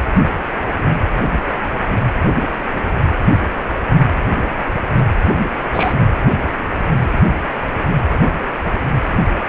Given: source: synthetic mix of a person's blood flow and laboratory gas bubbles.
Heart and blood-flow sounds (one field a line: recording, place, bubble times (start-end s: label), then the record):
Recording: Doppler ultrasound of blood flow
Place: precordium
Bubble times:
5.73-5.94 s: bubbles
From the record:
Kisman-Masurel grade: 113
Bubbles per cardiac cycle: 1 to 2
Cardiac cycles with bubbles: 1 to 10%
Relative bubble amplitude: loud (0.450 to 0.775)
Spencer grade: 1 (occasional bubble signal discernible with the cardiac motion signal, with majority of cardiac periods free of bubbles)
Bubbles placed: anywhere in the cardiac cycle